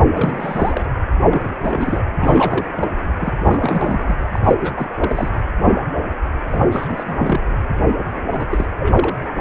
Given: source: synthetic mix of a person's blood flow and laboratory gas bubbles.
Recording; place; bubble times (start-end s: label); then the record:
Doppler ultrasound of blood flow; precordium
0.14-0.88 s: bubbles
1.30-1.54 s: bubbles
1.62-2.02 s: bubbles
2.16-2.67 s: bubbles
2.73-2.90 s: bubbles
3.18-3.33 s: bubbles
3.42-4.17 s: bubbles
4.31-4.39 s: bubbles
4.43-4.54 s: bubbles
4.59-5.29 s: bubbles
6.51-6.65 s: bubbles
6.71-7.41 s: bubbles
8.27-8.66 s: bubbles
8.79-9.28 s: bubbles
From the record:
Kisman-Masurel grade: 332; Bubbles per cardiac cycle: rolling drumbeat, 9 or more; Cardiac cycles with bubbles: 50 to 99%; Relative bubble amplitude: moderate (0.250 to 0.450); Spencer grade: 3 (all of the cardiac periods contain showers or single bubble signals, but not dominating or overriding the cardiac motion signals); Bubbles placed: anywhere in the cardiac cycle